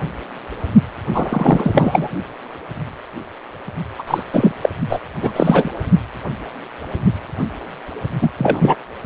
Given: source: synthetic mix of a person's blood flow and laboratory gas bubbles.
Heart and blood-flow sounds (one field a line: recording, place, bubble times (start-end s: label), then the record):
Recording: Doppler ultrasound of blood flow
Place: precordium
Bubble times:
1.14-2.10 s: bubbles
3.98-4.02 s: bubbles
4.07-4.23 s: bubbles
4.32-4.52 s: bubbles
4.61-4.69 s: bubbles
4.89-4.99 s: bubbles
5.21-5.32 s: bubbles
5.35-5.70 s: bubbles
8.21-8.30 s: bubbles
8.38-8.76 s: bubbles
From the record:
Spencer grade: 2 (many but less than half of the cardiac periods contain bubble signals, singularly or in groups)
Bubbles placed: only in the low amplitude regions of the cardiac cycle